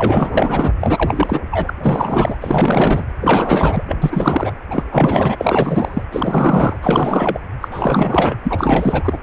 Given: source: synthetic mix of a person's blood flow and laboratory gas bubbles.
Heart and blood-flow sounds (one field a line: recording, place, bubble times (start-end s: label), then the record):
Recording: Doppler ultrasound of blood flow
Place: precordium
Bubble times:
0.00-0.74 s: bubbles
0.80-1.41 s: bubbles
1.51-1.70 s: bubbles
1.83-2.37 s: bubbles
2.41-3.04 s: bubbles
3.21-3.84 s: bubbles
3.88-3.97 s: bubbles
4.01-4.53 s: bubbles
4.70-4.83 s: bubbles
4.92-5.36 s: bubbles
5.40-6.04 s: bubbles
6.12-6.76 s: bubbles
6.81-7.38 s: bubbles
7.61-7.68 s: bubbles
7.71-8.36 s: bubbles
8.44-9.19 s: bubbles
From the record:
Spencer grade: 4 (maximum detectable bubble signal sounding continuously throughout systole and diastole of every cardiac period, and overriding the amplitude of the normal cardiac signals)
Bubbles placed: anywhere in the cardiac cycle